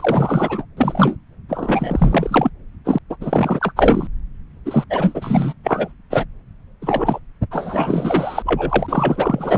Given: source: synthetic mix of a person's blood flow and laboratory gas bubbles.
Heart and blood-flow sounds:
Doppler ultrasound of blood flow; subclavian vein
0.00-0.66 s: bubbles
0.77-1.16 s: bubbles
1.48-2.50 s: bubbles
2.84-2.98 s: bubbles
3.09-3.16 s: bubbles
3.20-3.72 s: bubbles
3.76-4.07 s: bubbles
4.65-4.84 s: bubbles
4.90-5.53 s: bubbles
5.64-5.94 s: bubbles
6.10-6.26 s: bubbles
6.82-7.20 s: bubbles
7.51-8.43 s: bubbles
8.45-9.58 s: bubbles
From the record:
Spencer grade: 4 (maximum detectable bubble signal sounding continuously throughout systole and diastole of every cardiac period, and overriding the amplitude of the normal cardiac signals); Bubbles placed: anywhere in the cardiac cycle

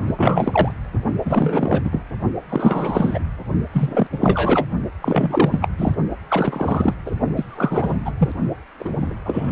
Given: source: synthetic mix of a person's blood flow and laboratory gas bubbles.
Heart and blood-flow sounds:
Doppler ultrasound of blood flow; precordium
0.06-0.73 s: bubbles
1.25-2.00 s: bubbles
2.49-3.20 s: bubbles
3.73-4.07 s: bubbles
4.11-4.18 s: bubbles
4.21-4.65 s: bubbles
5.01-5.68 s: bubbles
5.77-5.94 s: bubbles
6.28-6.93 s: bubbles
7.05-7.11 s: bubbles
7.36-7.97 s: bubbles
8.04-8.12 s: bubbles
8.17-8.32 s: bubbles
8.79-9.15 s: bubbles
9.25-9.52 s: bubbles
From the record:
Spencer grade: 3 (all of the cardiac periods contain showers or single bubble signals, but not dominating or overriding the cardiac motion signals); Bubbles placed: only in the low amplitude regions of the cardiac cycle

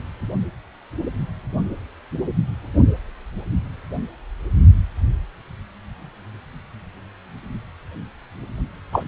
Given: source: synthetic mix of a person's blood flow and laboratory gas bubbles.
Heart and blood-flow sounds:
Doppler ultrasound of blood flow; precordium
8.92-9.04 s: bubbles
From the record:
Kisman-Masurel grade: 113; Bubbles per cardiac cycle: 1 to 2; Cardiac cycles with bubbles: 1 to 10%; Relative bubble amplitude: loud (0.450 to 0.775); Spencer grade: 1 (occasional bubble signal discernible with the cardiac motion signal, with majority of cardiac periods free of bubbles); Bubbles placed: only in the low amplitude regions of the cardiac cycle

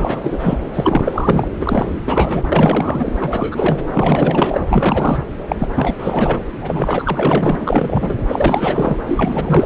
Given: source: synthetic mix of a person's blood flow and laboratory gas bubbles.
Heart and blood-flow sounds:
Doppler ultrasound of blood flow; subclavian vein
0.00-0.59 s: bubbles
0.73-1.47 s: bubbles
1.60-2.47 s: bubbles
2.52-3.12 s: bubbles
3.20-3.87 s: bubbles
3.94-4.60 s: bubbles
4.69-5.25 s: bubbles
5.48-5.56 s: bubbles
5.59-5.68 s: bubbles
5.75-6.41 s: bubbles
6.61-7.56 s: bubbles
7.59-8.16 s: bubbles
8.28-8.96 s: bubbles
9.06-9.66 s: bubbles
From the record:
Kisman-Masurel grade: 444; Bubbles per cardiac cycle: continuous sound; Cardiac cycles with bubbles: 100%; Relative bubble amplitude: maximal (0.775 to 0.999); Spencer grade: 4 (maximum detectable bubble signal sounding continuously throughout systole and diastole of every cardiac period, and overriding the amplitude of the normal cardiac signals); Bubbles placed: anywhere in the cardiac cycle

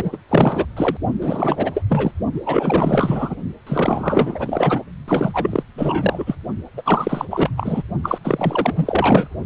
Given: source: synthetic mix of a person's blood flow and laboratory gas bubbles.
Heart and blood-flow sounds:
Doppler ultrasound of blood flow; precordium
0.00-0.18 s: bubbles
0.29-0.66 s: bubbles
0.77-0.97 s: bubbles
1.21-1.83 s: bubbles
1.89-2.11 s: bubbles
2.33-2.40 s: bubbles
2.46-3.35 s: bubbles
3.66-4.83 s: bubbles
5.08-5.63 s: bubbles
5.77-6.36 s: bubbles
6.77-6.82 s: bubbles
6.85-7.25 s: bubbles
7.30-7.50 s: bubbles
7.57-7.83 s: bubbles
8.03-8.18 s: bubbles
8.24-9.27 s: bubbles
From the record:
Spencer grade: 4 (maximum detectable bubble signal sounding continuously throughout systole and diastole of every cardiac period, and overriding the amplitude of the normal cardiac signals); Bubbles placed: only in the low amplitude regions of the cardiac cycle

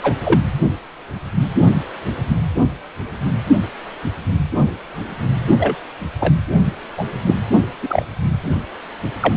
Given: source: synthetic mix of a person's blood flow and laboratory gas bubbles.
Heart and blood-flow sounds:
Doppler ultrasound of blood flow; precordium
0.03-0.15 s: bubbles
0.24-0.40 s: bubbles
5.59-5.75 s: bubbles
6.20-6.33 s: bubbles
6.97-7.04 s: bubbles
7.26-7.40 s: bubbles
7.82-8.04 s: bubbles
9.20-9.37 s: bubbles
From the record:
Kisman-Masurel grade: 123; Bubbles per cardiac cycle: 1 to 2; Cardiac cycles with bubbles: 10 to 50%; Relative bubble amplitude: loud (0.450 to 0.775); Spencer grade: 2 (many but less than half of the cardiac periods contain bubble signals, singularly or in groups); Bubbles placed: only in the low amplitude regions of the cardiac cycle

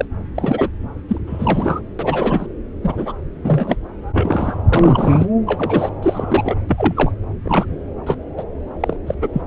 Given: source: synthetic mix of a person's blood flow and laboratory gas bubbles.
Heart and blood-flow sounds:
Doppler ultrasound of blood flow; subclavian vein
0.00-0.05 s: bubbles
0.34-0.69 s: bubbles
1.08-1.18 s: bubbles
1.27-1.83 s: bubbles
1.99-2.46 s: bubbles
2.83-3.12 s: bubbles
3.44-3.76 s: bubbles
4.13-4.56 s: bubbles
4.69-5.26 s: bubbles
5.47-5.90 s: bubbles
6.02-6.56 s: bubbles
6.69-7.12 s: bubbles
7.45-7.66 s: bubbles
8.06-8.16 s: bubbles
8.37-8.43 s: bubbles
8.80-8.96 s: bubbles
9.06-9.14 s: bubbles
9.21-9.28 s: bubbles
9.33-9.41 s: bubbles
From the record:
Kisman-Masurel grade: 243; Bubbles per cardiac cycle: several, 3 to 8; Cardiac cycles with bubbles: 100%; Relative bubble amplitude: loud (0.450 to 0.775); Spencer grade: 3 (all of the cardiac periods contain showers or single bubble signals, but not dominating or overriding the cardiac motion signals); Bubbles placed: anywhere in the cardiac cycle

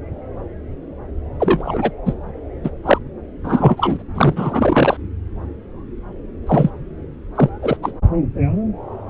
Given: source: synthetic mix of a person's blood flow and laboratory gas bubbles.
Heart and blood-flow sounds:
Doppler ultrasound of blood flow; subclavian vein
1.39-1.91 s: bubbles
2.05-2.13 s: bubbles
2.63-2.70 s: bubbles
2.84-2.98 s: bubbles
3.44-4.02 s: bubbles
4.15-4.97 s: bubbles
6.46-6.70 s: bubbles
7.35-7.50 s: bubbles
7.62-7.77 s: bubbles
7.82-7.92 s: bubbles
From the record:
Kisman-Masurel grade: 233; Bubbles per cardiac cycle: several, 3 to 8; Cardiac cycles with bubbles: 50 to 99%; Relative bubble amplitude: loud (0.450 to 0.775); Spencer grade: 3 (all of the cardiac periods contain showers or single bubble signals, but not dominating or overriding the cardiac motion signals); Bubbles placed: anywhere in the cardiac cycle

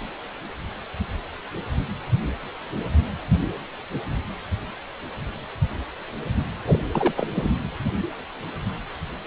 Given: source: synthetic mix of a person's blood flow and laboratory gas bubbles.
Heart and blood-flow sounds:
Doppler ultrasound of blood flow; precordium
6.64-6.86 s: bubbles
6.92-7.14 s: bubbles
7.17-7.28 s: bubbles
7.35-7.52 s: bubbles
From the record:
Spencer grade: 1 (occasional bubble signal discernible with the cardiac motion signal, with majority of cardiac periods free of bubbles); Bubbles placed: anywhere in the cardiac cycle

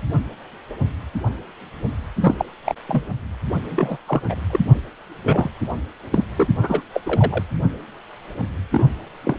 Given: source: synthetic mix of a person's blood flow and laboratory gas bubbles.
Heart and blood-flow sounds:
Doppler ultrasound of blood flow; precordium
2.20-2.35 s: bubbles
2.38-2.45 s: bubbles
2.65-2.74 s: bubbles
2.88-3.03 s: bubbles
3.70-3.98 s: bubbles
4.07-4.21 s: bubbles
4.29-4.35 s: bubbles
4.50-4.59 s: bubbles
5.25-5.50 s: bubbles
6.11-6.25 s: bubbles
6.38-6.48 s: bubbles
6.62-6.81 s: bubbles
6.93-7.00 s: bubbles
7.06-7.44 s: bubbles
8.71-8.92 s: bubbles
9.23-9.37 s: bubbles
From the record:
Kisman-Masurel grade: 232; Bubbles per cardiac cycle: several, 3 to 8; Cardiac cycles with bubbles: 50 to 99%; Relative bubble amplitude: moderate (0.250 to 0.450); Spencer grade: 3 (all of the cardiac periods contain showers or single bubble signals, but not dominating or overriding the cardiac motion signals); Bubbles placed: anywhere in the cardiac cycle

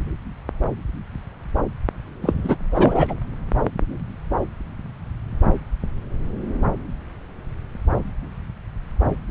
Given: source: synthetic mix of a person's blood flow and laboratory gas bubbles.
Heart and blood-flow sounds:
Doppler ultrasound of blood flow; subclavian vein
2.21-2.33 s: bubbles
2.43-2.57 s: bubbles
2.71-3.15 s: bubbles
From the record:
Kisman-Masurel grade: 213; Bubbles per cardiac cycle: several, 3 to 8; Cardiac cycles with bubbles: 1 to 10%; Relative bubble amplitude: loud (0.450 to 0.775); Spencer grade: 1 (occasional bubble signal discernible with the cardiac motion signal, with majority of cardiac periods free of bubbles); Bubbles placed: anywhere in the cardiac cycle

